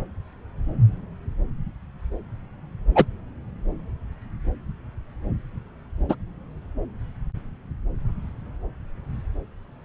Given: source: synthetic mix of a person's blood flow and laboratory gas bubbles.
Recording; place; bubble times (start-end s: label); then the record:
Doppler ultrasound of blood flow; subclavian vein
2.95-3.06 s: bubbles
6.08-6.15 s: bubbles
From the record:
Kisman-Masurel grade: 123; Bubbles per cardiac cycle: 1 to 2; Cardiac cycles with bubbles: 10 to 50%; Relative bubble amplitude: loud (0.450 to 0.775); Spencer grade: 2 (many but less than half of the cardiac periods contain bubble signals, singularly or in groups); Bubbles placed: anywhere in the cardiac cycle